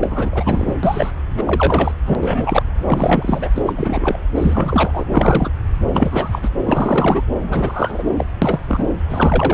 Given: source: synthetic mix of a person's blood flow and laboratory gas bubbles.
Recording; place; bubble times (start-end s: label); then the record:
Doppler ultrasound of blood flow; subclavian vein
0.00-0.74 s: bubbles
0.83-1.10 s: bubbles
1.36-1.92 s: bubbles
2.05-2.16 s: bubbles
2.21-2.63 s: bubbles
2.85-3.49 s: bubbles
3.55-3.63 s: bubbles
3.66-3.74 s: bubbles
3.76-4.17 s: bubbles
4.34-5.04 s: bubbles
5.08-5.50 s: bubbles
5.93-6.39 s: bubbles
6.42-6.49 s: bubbles
6.66-7.23 s: bubbles
7.47-8.03 s: bubbles
8.16-8.26 s: bubbles
8.41-8.59 s: bubbles
8.68-8.85 s: bubbles
9.09-9.54 s: bubbles
From the record:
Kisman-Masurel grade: 343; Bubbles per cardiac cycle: rolling drumbeat, 9 or more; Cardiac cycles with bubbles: 100%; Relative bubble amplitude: loud (0.450 to 0.775); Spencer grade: 3 (all of the cardiac periods contain showers or single bubble signals, but not dominating or overriding the cardiac motion signals); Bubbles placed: anywhere in the cardiac cycle